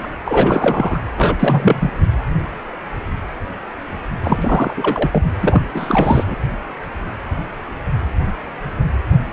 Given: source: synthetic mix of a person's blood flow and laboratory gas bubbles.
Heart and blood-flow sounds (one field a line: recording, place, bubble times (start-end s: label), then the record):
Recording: Doppler ultrasound of blood flow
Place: precordium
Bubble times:
0.00-0.09 s: bubbles
0.27-0.98 s: bubbles
1.17-1.91 s: bubbles
4.24-4.74 s: bubbles
4.76-5.24 s: bubbles
5.41-5.62 s: bubbles
5.74-6.37 s: bubbles
From the record:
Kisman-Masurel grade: 333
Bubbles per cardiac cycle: rolling drumbeat, 9 or more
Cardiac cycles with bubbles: 50 to 99%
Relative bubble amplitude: loud (0.450 to 0.775)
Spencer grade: 3 (all of the cardiac periods contain showers or single bubble signals, but not dominating or overriding the cardiac motion signals)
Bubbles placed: anywhere in the cardiac cycle